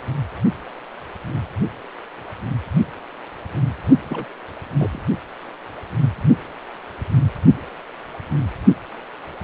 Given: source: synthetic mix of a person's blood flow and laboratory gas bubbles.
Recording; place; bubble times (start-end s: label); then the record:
Doppler ultrasound of blood flow; precordium
4.09-4.26 s: bubbles
4.78-5.03 s: bubbles
From the record:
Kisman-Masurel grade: 211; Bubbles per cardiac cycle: several, 3 to 8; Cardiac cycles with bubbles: 1 to 10%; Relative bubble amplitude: barely perceptible (0.100 to 0.250); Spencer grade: 1 (occasional bubble signal discernible with the cardiac motion signal, with majority of cardiac periods free of bubbles); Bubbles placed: only in the low amplitude regions of the cardiac cycle